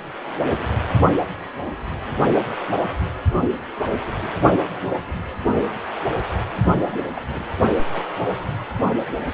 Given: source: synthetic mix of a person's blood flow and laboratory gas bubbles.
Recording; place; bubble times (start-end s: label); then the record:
Doppler ultrasound of blood flow; precordium
6.78-6.96 s: bubbles
7.16-7.21 s: bubbles
7.33-7.47 s: bubbles
7.91-8.04 s: bubbles
From the record:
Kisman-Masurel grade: 211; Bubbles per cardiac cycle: several, 3 to 8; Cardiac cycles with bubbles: 1 to 10%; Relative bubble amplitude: barely perceptible (0.100 to 0.250); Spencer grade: 1 (occasional bubble signal discernible with the cardiac motion signal, with majority of cardiac periods free of bubbles); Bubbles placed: only in the low amplitude regions of the cardiac cycle